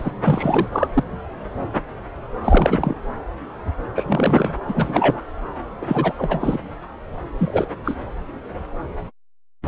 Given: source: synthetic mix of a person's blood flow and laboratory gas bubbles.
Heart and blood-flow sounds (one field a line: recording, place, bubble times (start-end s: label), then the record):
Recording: Doppler ultrasound of blood flow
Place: subclavian vein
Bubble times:
0.00-0.11 s: bubbles
0.23-0.67 s: bubbles
0.72-0.88 s: bubbles
0.93-1.04 s: bubbles
2.44-2.95 s: bubbles
3.95-4.53 s: bubbles
4.68-5.22 s: bubbles
5.81-6.13 s: bubbles
6.17-6.59 s: bubbles
7.37-7.67 s: bubbles
7.84-7.95 s: bubbles
From the record:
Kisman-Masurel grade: 333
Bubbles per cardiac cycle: rolling drumbeat, 9 or more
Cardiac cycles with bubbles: 50 to 99%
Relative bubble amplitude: loud (0.450 to 0.775)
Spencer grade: 3 (all of the cardiac periods contain showers or single bubble signals, but not dominating or overriding the cardiac motion signals)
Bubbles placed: anywhere in the cardiac cycle